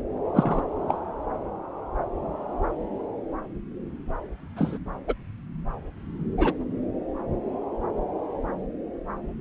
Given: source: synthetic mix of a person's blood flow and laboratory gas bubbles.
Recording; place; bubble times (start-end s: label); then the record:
Doppler ultrasound of blood flow; subclavian vein
0.00-0.02 s: bubbles
0.34-0.61 s: bubbles
0.88-0.97 s: bubbles
4.57-4.78 s: bubbles
5.08-5.14 s: bubbles
6.38-6.53 s: bubbles
From the record:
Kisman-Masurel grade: 122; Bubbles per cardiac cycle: 1 to 2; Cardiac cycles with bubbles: 10 to 50%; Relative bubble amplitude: moderate (0.250 to 0.450); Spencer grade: 2 (many but less than half of the cardiac periods contain bubble signals, singularly or in groups); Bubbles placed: anywhere in the cardiac cycle